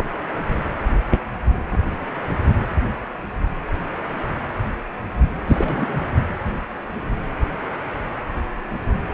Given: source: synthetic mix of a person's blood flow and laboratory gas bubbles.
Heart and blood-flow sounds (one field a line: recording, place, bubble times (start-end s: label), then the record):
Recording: Doppler ultrasound of blood flow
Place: precordium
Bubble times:
5.47-6.01 s: bubbles
From the record:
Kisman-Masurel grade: 222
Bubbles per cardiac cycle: several, 3 to 8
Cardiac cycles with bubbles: 10 to 50%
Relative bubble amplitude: moderate (0.250 to 0.450)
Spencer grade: 2 (many but less than half of the cardiac periods contain bubble signals, singularly or in groups)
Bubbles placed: anywhere in the cardiac cycle